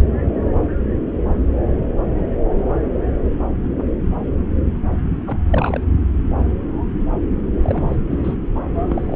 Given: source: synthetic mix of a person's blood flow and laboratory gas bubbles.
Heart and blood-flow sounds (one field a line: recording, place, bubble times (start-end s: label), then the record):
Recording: Doppler ultrasound of blood flow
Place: subclavian vein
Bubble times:
5.26-5.38 s: bubbles
5.50-5.83 s: bubbles
7.63-7.96 s: bubbles
8.11-8.19 s: bubbles
8.23-8.35 s: bubbles
8.55-8.60 s: bubbles
8.90-9.16 s: bubbles
From the record:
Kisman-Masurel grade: 222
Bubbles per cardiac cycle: several, 3 to 8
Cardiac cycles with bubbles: 10 to 50%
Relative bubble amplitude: moderate (0.250 to 0.450)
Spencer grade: 2 (many but less than half of the cardiac periods contain bubble signals, singularly or in groups)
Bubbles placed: anywhere in the cardiac cycle